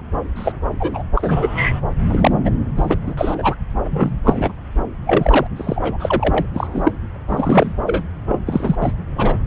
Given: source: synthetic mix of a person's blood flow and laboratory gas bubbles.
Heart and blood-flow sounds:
Doppler ultrasound of blood flow; subclavian vein
0.36-0.52 s: bubbles
0.79-1.03 s: bubbles
1.15-1.80 s: bubbles
2.07-2.32 s: bubbles
2.45-2.50 s: bubbles
2.76-2.97 s: bubbles
3.06-3.14 s: bubbles
3.17-3.34 s: bubbles
3.38-3.55 s: bubbles
3.84-4.17 s: bubbles
4.25-4.52 s: bubbles
5.06-5.47 s: bubbles
5.56-6.46 s: bubbles
6.54-6.92 s: bubbles
7.28-7.73 s: bubbles
7.86-8.04 s: bubbles
8.29-8.39 s: bubbles
8.46-8.75 s: bubbles
8.80-8.92 s: bubbles
9.15-9.37 s: bubbles
From the record:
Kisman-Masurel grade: 243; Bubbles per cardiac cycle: several, 3 to 8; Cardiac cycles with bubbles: 100%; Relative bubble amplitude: loud (0.450 to 0.775); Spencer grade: 3 (all of the cardiac periods contain showers or single bubble signals, but not dominating or overriding the cardiac motion signals); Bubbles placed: anywhere in the cardiac cycle

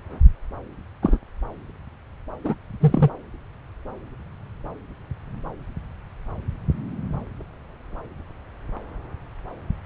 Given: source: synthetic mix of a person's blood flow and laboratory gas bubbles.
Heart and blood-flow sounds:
Doppler ultrasound of blood flow; subclavian vein
1.02-1.18 s: bubbles
2.44-2.55 s: bubbles
2.81-3.10 s: bubbles
From the record:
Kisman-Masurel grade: 123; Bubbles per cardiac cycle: 1 to 2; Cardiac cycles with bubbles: 10 to 50%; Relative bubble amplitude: loud (0.450 to 0.775); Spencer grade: 2 (many but less than half of the cardiac periods contain bubble signals, singularly or in groups); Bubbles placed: anywhere in the cardiac cycle

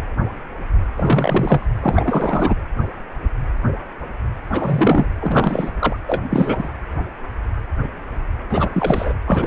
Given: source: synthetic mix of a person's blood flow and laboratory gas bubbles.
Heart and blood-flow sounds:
Doppler ultrasound of blood flow; precordium
0.00-0.02 s: bubbles
0.97-1.66 s: bubbles
1.81-2.56 s: bubbles
4.52-5.08 s: bubbles
5.20-5.71 s: bubbles
5.79-5.96 s: bubbles
6.07-6.21 s: bubbles
6.29-6.68 s: bubbles
8.49-8.70 s: bubbles
8.73-9.13 s: bubbles
9.26-9.47 s: bubbles
From the record:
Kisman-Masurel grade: 333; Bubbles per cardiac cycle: rolling drumbeat, 9 or more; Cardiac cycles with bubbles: 50 to 99%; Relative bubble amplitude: loud (0.450 to 0.775); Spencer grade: 3 (all of the cardiac periods contain showers or single bubble signals, but not dominating or overriding the cardiac motion signals); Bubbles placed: anywhere in the cardiac cycle

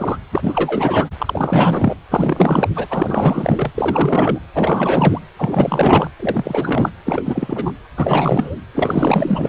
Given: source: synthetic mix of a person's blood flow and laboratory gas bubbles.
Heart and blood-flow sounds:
Doppler ultrasound of blood flow; precordium
0.00-0.18 s: bubbles
0.31-1.08 s: bubbles
1.19-1.94 s: bubbles
2.10-2.69 s: bubbles
2.75-3.71 s: bubbles
3.75-4.39 s: bubbles
4.54-5.21 s: bubbles
5.38-6.10 s: bubbles
6.19-6.90 s: bubbles
7.04-7.71 s: bubbles
7.96-8.56 s: bubbles
8.75-9.49 s: bubbles
From the record:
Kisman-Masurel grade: 444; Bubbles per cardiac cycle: continuous sound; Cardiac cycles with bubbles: 100%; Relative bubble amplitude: maximal (0.775 to 0.999); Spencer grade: 4 (maximum detectable bubble signal sounding continuously throughout systole and diastole of every cardiac period, and overriding the amplitude of the normal cardiac signals); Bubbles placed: anywhere in the cardiac cycle

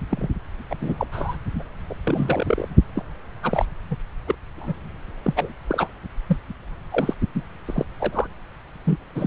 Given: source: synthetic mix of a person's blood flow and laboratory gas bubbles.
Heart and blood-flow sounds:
Doppler ultrasound of blood flow; subclavian vein
0.11-0.29 s: bubbles
0.70-0.76 s: bubbles
0.81-1.07 s: bubbles
1.12-1.37 s: bubbles
1.55-1.63 s: bubbles
1.90-1.94 s: bubbles
2.03-2.68 s: bubbles
2.95-3.03 s: bubbles
3.42-3.65 s: bubbles
3.90-3.97 s: bubbles
4.27-4.35 s: bubbles
4.58-4.74 s: bubbles
5.23-5.33 s: bubbles
5.36-5.53 s: bubbles
5.67-5.91 s: bubbles
6.28-6.37 s: bubbles
6.91-7.15 s: bubbles
7.35-7.42 s: bubbles
7.67-7.85 s: bubbles
8.00-8.27 s: bubbles
8.86-8.96 s: bubbles
9.15-9.27 s: bubbles
From the record:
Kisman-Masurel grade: 242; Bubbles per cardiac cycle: several, 3 to 8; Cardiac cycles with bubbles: 100%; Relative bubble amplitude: moderate (0.250 to 0.450); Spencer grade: 3 (all of the cardiac periods contain showers or single bubble signals, but not dominating or overriding the cardiac motion signals); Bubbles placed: anywhere in the cardiac cycle

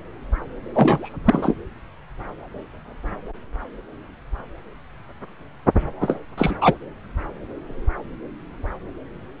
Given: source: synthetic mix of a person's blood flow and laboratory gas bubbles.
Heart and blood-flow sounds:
Doppler ultrasound of blood flow; subclavian vein
0.74-1.13 s: bubbles
1.25-1.54 s: bubbles
6.00-6.16 s: bubbles
6.38-6.54 s: bubbles
6.61-6.75 s: bubbles
From the record:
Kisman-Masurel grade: 223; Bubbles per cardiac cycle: several, 3 to 8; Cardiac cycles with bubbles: 10 to 50%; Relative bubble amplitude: loud (0.450 to 0.775); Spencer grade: 2 (many but less than half of the cardiac periods contain bubble signals, singularly or in groups); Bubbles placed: anywhere in the cardiac cycle

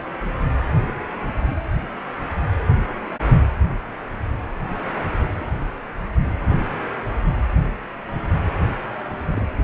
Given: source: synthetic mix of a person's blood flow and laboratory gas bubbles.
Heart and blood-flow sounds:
Doppler ultrasound of blood flow; precordium
0.87-0.93 s: bubbles
1.42-1.56 s: bubbles
5.40-5.44 s: bubbles
9.29-9.47 s: bubbles
9.58-9.62 s: bubbles
From the record:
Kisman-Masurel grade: 121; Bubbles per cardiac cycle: 1 to 2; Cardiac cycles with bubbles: 10 to 50%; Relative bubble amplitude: barely perceptible (0.100 to 0.250); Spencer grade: 2 (many but less than half of the cardiac periods contain bubble signals, singularly or in groups); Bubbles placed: anywhere in the cardiac cycle

